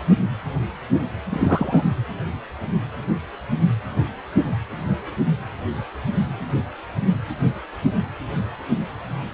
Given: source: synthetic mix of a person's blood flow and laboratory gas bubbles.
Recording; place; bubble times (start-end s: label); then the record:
Doppler ultrasound of blood flow; precordium
1.30-1.83 s: bubbles
From the record:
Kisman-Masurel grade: 212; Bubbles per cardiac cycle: several, 3 to 8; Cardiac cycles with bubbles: 1 to 10%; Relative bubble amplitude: moderate (0.250 to 0.450); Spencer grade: 1 (occasional bubble signal discernible with the cardiac motion signal, with majority of cardiac periods free of bubbles); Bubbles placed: anywhere in the cardiac cycle